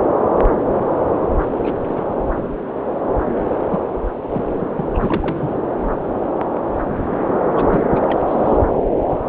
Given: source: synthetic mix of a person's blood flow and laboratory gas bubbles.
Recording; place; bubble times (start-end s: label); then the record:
Doppler ultrasound of blood flow; subclavian vein
1.64-1.73 s: bubbles
1.86-2.18 s: bubbles
3.70-3.79 s: bubbles
4.33-4.45 s: bubbles
4.57-4.66 s: bubbles
4.74-4.87 s: bubbles
4.94-5.52 s: bubbles
7.54-7.87 s: bubbles
7.91-8.19 s: bubbles
8.27-8.58 s: bubbles
From the record:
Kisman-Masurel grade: 221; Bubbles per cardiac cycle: several, 3 to 8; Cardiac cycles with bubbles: 10 to 50%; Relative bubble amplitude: barely perceptible (0.100 to 0.250); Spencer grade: 2 (many but less than half of the cardiac periods contain bubble signals, singularly or in groups); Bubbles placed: anywhere in the cardiac cycle